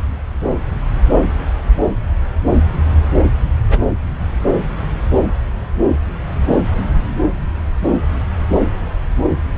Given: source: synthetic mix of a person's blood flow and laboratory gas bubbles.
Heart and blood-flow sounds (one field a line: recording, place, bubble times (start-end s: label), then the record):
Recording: Doppler ultrasound of blood flow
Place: subclavian vein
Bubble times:
3.70-3.79 s: bubbles
From the record:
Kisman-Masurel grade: 112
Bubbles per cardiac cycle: 1 to 2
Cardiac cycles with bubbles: 1 to 10%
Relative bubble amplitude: moderate (0.250 to 0.450)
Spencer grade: 1 (occasional bubble signal discernible with the cardiac motion signal, with majority of cardiac periods free of bubbles)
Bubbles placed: anywhere in the cardiac cycle